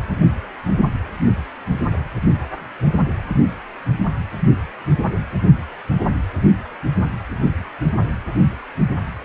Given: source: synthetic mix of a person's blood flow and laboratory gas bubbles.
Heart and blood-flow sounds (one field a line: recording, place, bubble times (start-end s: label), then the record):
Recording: Doppler ultrasound of blood flow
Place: precordium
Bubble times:
no bubbles
From the record:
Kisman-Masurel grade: 000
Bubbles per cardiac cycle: 0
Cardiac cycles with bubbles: 0%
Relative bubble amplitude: no bubbles discernible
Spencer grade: 0 (complete lack of bubble signals)